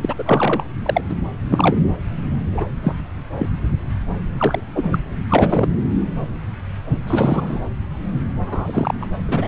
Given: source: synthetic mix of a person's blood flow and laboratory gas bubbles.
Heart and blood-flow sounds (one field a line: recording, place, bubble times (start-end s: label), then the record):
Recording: Doppler ultrasound of blood flow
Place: subclavian vein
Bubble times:
0.02-0.14 s: bubbles
0.18-0.64 s: bubbles
0.85-1.01 s: bubbles
1.09-1.15 s: bubbles
1.50-1.76 s: bubbles
2.52-2.65 s: bubbles
2.83-2.92 s: bubbles
3.38-3.50 s: bubbles
4.38-4.60 s: bubbles
4.75-4.83 s: bubbles
4.92-5.00 s: bubbles
5.29-5.68 s: bubbles
7.07-7.60 s: bubbles
8.47-9.09 s: bubbles
9.28-9.48 s: bubbles
From the record:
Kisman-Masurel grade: 233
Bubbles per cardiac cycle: several, 3 to 8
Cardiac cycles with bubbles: 50 to 99%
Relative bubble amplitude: loud (0.450 to 0.775)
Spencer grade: 3 (all of the cardiac periods contain showers or single bubble signals, but not dominating or overriding the cardiac motion signals)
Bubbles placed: anywhere in the cardiac cycle